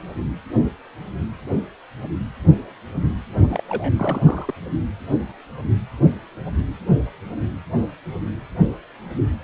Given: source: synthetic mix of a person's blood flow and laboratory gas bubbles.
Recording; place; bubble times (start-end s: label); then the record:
Doppler ultrasound of blood flow; precordium
3.48-3.64 s: bubbles
3.69-3.94 s: bubbles
3.97-4.54 s: bubbles
From the record:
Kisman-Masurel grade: 211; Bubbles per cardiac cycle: several, 3 to 8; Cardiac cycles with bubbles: 1 to 10%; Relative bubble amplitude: barely perceptible (0.100 to 0.250); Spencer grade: 1 (occasional bubble signal discernible with the cardiac motion signal, with majority of cardiac periods free of bubbles); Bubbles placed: only in the low amplitude regions of the cardiac cycle